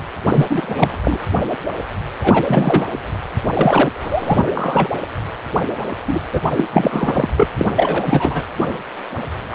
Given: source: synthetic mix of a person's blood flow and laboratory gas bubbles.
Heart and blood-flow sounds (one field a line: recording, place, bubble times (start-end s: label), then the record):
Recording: Doppler ultrasound of blood flow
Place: precordium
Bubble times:
0.29-0.46 s: bubbles
0.49-0.97 s: bubbles
1.04-1.18 s: bubbles
2.20-2.96 s: bubbles
3.54-3.90 s: bubbles
4.00-4.44 s: bubbles
4.46-4.51 s: bubbles
4.54-4.88 s: bubbles
6.07-6.20 s: bubbles
6.31-6.42 s: bubbles
6.56-6.65 s: bubbles
6.72-7.28 s: bubbles
7.37-7.47 s: bubbles
7.58-7.66 s: bubbles
7.76-8.44 s: bubbles
9.50-9.55 s: bubbles
From the record:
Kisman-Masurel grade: 333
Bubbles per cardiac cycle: rolling drumbeat, 9 or more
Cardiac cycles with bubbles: 50 to 99%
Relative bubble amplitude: loud (0.450 to 0.775)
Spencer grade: 3 (all of the cardiac periods contain showers or single bubble signals, but not dominating or overriding the cardiac motion signals)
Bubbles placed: anywhere in the cardiac cycle